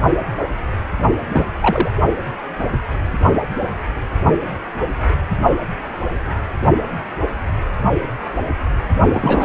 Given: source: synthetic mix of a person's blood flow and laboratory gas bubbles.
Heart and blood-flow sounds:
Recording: Doppler ultrasound of blood flow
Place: precordium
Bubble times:
1.31-1.48 s: bubbles
1.61-1.91 s: bubbles
9.11-9.44 s: bubbles
From the record:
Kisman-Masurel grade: 223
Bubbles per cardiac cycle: several, 3 to 8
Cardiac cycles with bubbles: 10 to 50%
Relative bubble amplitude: loud (0.450 to 0.775)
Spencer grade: 2 (many but less than half of the cardiac periods contain bubble signals, singularly or in groups)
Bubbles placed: only in the low amplitude regions of the cardiac cycle

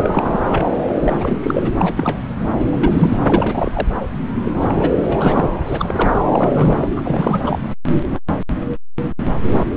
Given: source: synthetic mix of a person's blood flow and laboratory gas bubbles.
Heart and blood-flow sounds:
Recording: Doppler ultrasound of blood flow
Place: subclavian vein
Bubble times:
0.00-0.40 s: bubbles
0.51-0.72 s: bubbles
0.99-1.72 s: bubbles
1.80-2.20 s: bubbles
2.62-3.18 s: bubbles
3.21-3.88 s: bubbles
4.45-4.52 s: bubbles
4.54-5.03 s: bubbles
5.08-5.50 s: bubbles
5.66-6.16 s: bubbles
6.33-6.90 s: bubbles
6.96-7.59 s: bubbles
From the record:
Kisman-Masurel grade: 332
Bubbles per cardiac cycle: rolling drumbeat, 9 or more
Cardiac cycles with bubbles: 50 to 99%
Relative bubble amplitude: moderate (0.250 to 0.450)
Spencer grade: 3 (all of the cardiac periods contain showers or single bubble signals, but not dominating or overriding the cardiac motion signals)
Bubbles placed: anywhere in the cardiac cycle

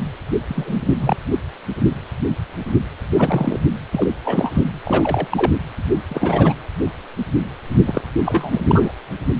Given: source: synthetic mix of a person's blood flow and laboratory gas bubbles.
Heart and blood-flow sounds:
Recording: Doppler ultrasound of blood flow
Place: precordium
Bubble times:
0.48-0.83 s: bubbles
0.86-0.95 s: bubbles
1.00-1.17 s: bubbles
3.14-3.58 s: bubbles
3.92-4.08 s: bubbles
4.25-4.51 s: bubbles
4.54-4.63 s: bubbles
4.84-5.28 s: bubbles
5.31-5.51 s: bubbles
6.08-6.56 s: bubbles
7.86-8.02 s: bubbles
8.24-8.62 s: bubbles
8.67-8.93 s: bubbles
From the record:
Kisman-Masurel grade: 232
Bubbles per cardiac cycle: several, 3 to 8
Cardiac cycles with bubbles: 50 to 99%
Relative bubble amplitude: moderate (0.250 to 0.450)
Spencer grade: 3 (all of the cardiac periods contain showers or single bubble signals, but not dominating or overriding the cardiac motion signals)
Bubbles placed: anywhere in the cardiac cycle

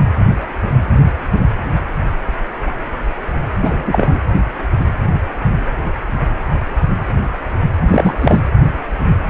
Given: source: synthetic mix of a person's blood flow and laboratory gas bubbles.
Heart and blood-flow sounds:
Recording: Doppler ultrasound of blood flow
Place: precordium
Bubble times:
3.62-4.19 s: bubbles
7.91-8.14 s: bubbles
8.21-8.40 s: bubbles
From the record:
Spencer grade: 1 (occasional bubble signal discernible with the cardiac motion signal, with majority of cardiac periods free of bubbles)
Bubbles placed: anywhere in the cardiac cycle

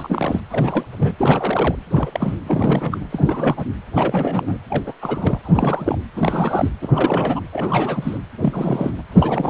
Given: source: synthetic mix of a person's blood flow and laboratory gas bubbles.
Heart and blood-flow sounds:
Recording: Doppler ultrasound of blood flow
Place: precordium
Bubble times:
0.00-0.41 s: bubbles
0.50-0.85 s: bubbles
0.99-1.15 s: bubbles
1.18-1.76 s: bubbles
1.91-2.42 s: bubbles
2.46-3.07 s: bubbles
3.12-3.66 s: bubbles
3.96-4.58 s: bubbles
4.69-4.93 s: bubbles
5.01-5.39 s: bubbles
5.43-5.98 s: bubbles
6.16-6.71 s: bubbles
6.81-7.40 s: bubbles
7.52-8.17 s: bubbles
8.41-9.02 s: bubbles
9.11-9.50 s: bubbles
From the record:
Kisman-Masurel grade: 342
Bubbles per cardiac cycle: rolling drumbeat, 9 or more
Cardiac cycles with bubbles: 100%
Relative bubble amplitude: moderate (0.250 to 0.450)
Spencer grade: 3 (all of the cardiac periods contain showers or single bubble signals, but not dominating or overriding the cardiac motion signals)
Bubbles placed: anywhere in the cardiac cycle

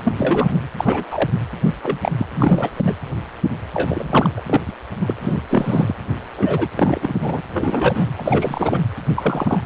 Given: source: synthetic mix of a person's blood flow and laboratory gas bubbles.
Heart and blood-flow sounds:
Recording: Doppler ultrasound of blood flow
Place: precordium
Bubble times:
0.04-0.12 s: bubbles
0.17-0.59 s: bubbles
0.78-1.30 s: bubbles
1.67-1.74 s: bubbles
1.82-1.98 s: bubbles
2.03-2.12 s: bubbles
2.18-2.26 s: bubbles
2.34-2.70 s: bubbles
2.76-2.96 s: bubbles
3.73-4.31 s: bubbles
4.36-4.61 s: bubbles
4.68-4.71 s: bubbles
5.01-5.14 s: bubbles
5.21-5.42 s: bubbles
5.50-5.95 s: bubbles
6.37-6.68 s: bubbles
6.75-7.42 s: bubbles
7.54-8.10 s: bubbles
8.17-8.81 s: bubbles
9.15-9.61 s: bubbles
From the record:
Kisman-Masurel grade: 242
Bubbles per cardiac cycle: several, 3 to 8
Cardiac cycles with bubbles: 100%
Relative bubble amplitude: moderate (0.250 to 0.450)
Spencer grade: 3 (all of the cardiac periods contain showers or single bubble signals, but not dominating or overriding the cardiac motion signals)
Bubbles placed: anywhere in the cardiac cycle

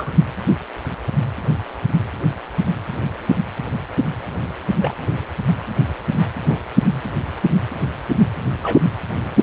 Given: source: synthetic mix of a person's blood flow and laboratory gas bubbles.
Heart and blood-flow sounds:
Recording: Doppler ultrasound of blood flow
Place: precordium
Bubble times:
0.00-0.15 s: bubbles
4.80-4.94 s: bubbles
6.47-6.59 s: bubbles
8.62-8.81 s: bubbles
From the record:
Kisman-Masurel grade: 122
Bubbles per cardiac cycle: 1 to 2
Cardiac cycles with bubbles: 10 to 50%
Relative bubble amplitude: moderate (0.250 to 0.450)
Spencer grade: 2 (many but less than half of the cardiac periods contain bubble signals, singularly or in groups)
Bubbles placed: anywhere in the cardiac cycle

